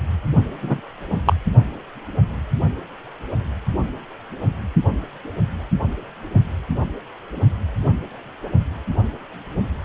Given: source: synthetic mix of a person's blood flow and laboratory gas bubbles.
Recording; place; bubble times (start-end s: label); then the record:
Doppler ultrasound of blood flow; precordium
0.61-0.81 s: bubbles
1.25-1.33 s: bubbles
From the record:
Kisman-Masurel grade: 113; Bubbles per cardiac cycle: 1 to 2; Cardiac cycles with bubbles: 1 to 10%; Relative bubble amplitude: loud (0.450 to 0.775); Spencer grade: 1 (occasional bubble signal discernible with the cardiac motion signal, with majority of cardiac periods free of bubbles); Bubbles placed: only in the low amplitude regions of the cardiac cycle